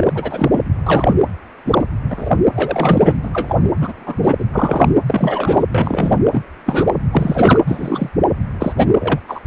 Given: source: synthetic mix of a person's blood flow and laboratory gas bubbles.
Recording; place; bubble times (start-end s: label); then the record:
Doppler ultrasound of blood flow; precordium
0.00-0.59 s: bubbles
0.86-1.15 s: bubbles
1.65-1.85 s: bubbles
2.10-2.29 s: bubbles
2.54-3.17 s: bubbles
3.23-3.56 s: bubbles
3.81-4.34 s: bubbles
4.39-4.45 s: bubbles
4.52-4.88 s: bubbles
5.07-5.64 s: bubbles
5.74-6.20 s: bubbles
6.32-6.42 s: bubbles
6.65-6.92 s: bubbles
7.11-7.59 s: bubbles
7.66-8.09 s: bubbles
8.59-8.86 s: bubbles
8.99-9.19 s: bubbles
9.28-9.40 s: bubbles
From the record:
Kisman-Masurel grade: 233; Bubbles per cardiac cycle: several, 3 to 8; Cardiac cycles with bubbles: 50 to 99%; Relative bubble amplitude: loud (0.450 to 0.775); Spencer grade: 3 (all of the cardiac periods contain showers or single bubble signals, but not dominating or overriding the cardiac motion signals); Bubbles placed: anywhere in the cardiac cycle